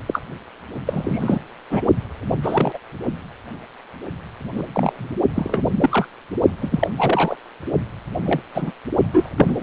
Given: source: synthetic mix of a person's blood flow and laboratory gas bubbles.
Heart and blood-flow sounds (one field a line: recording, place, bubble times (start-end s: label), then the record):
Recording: Doppler ultrasound of blood flow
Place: precordium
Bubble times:
0.07-0.21 s: bubbles
0.86-1.40 s: bubbles
1.70-1.81 s: bubbles
2.42-2.78 s: bubbles
4.53-4.64 s: bubbles
4.68-5.10 s: bubbles
5.34-5.73 s: bubbles
5.80-6.08 s: bubbles
6.61-6.88 s: bubbles
6.97-7.36 s: bubbles
8.25-8.40 s: bubbles
8.54-8.72 s: bubbles
9.13-9.29 s: bubbles
9.36-9.63 s: bubbles
From the record:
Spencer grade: 3 (all of the cardiac periods contain showers or single bubble signals, but not dominating or overriding the cardiac motion signals)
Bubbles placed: only in the low amplitude regions of the cardiac cycle